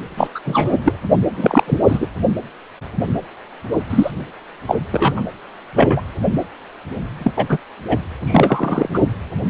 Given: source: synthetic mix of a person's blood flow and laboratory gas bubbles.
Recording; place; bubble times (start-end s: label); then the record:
Doppler ultrasound of blood flow; precordium
0.17-0.28 s: bubbles
0.35-0.40 s: bubbles
0.45-0.97 s: bubbles
1.37-1.64 s: bubbles
1.67-1.79 s: bubbles
1.86-2.08 s: bubbles
3.90-4.10 s: bubbles
4.67-4.75 s: bubbles
4.92-5.21 s: bubbles
5.75-6.01 s: bubbles
7.19-7.31 s: bubbles
7.36-7.57 s: bubbles
7.88-7.98 s: bubbles
8.25-8.89 s: bubbles
8.93-9.00 s: bubbles
From the record:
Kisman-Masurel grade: 233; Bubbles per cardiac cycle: several, 3 to 8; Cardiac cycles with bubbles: 50 to 99%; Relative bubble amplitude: loud (0.450 to 0.775); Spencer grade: 3 (all of the cardiac periods contain showers or single bubble signals, but not dominating or overriding the cardiac motion signals); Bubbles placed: anywhere in the cardiac cycle